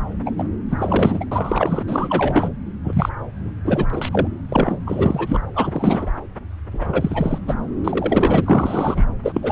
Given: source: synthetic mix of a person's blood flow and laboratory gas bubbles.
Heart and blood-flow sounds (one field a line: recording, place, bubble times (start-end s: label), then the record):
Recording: Doppler ultrasound of blood flow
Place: subclavian vein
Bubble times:
0.26-0.31 s: bubbles
0.38-0.44 s: bubbles
0.69-1.25 s: bubbles
1.31-1.83 s: bubbles
1.88-2.48 s: bubbles
2.85-3.09 s: bubbles
3.65-3.86 s: bubbles
3.90-4.28 s: bubbles
4.49-4.76 s: bubbles
4.86-5.40 s: bubbles
5.55-6.07 s: bubbles
6.72-7.38 s: bubbles
7.47-7.54 s: bubbles
7.84-9.04 s: bubbles
9.23-9.52 s: bubbles
From the record:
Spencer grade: 3 (all of the cardiac periods contain showers or single bubble signals, but not dominating or overriding the cardiac motion signals)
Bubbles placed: anywhere in the cardiac cycle